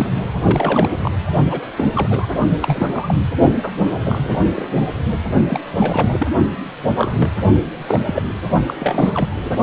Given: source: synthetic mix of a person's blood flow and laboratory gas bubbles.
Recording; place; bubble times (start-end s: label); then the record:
Doppler ultrasound of blood flow; precordium
0.00-0.07 s: bubbles
0.43-0.89 s: bubbles
1.02-1.11 s: bubbles
1.50-1.61 s: bubbles
1.77-1.91 s: bubbles
1.95-2.26 s: bubbles
2.62-3.15 s: bubbles
3.63-3.71 s: bubbles
4.04-4.43 s: bubbles
4.55-4.67 s: bubbles
4.78-4.88 s: bubbles
5.47-5.59 s: bubbles
5.75-6.27 s: bubbles
6.95-7.12 s: bubbles
7.17-7.30 s: bubbles
7.86-8.00 s: bubbles
8.05-8.22 s: bubbles
8.67-8.75 s: bubbles
8.79-9.29 s: bubbles
9.36-9.57 s: bubbles
From the record:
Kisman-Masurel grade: 232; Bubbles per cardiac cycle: several, 3 to 8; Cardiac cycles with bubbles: 50 to 99%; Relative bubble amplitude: moderate (0.250 to 0.450); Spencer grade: 3 (all of the cardiac periods contain showers or single bubble signals, but not dominating or overriding the cardiac motion signals); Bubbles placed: only in the low amplitude regions of the cardiac cycle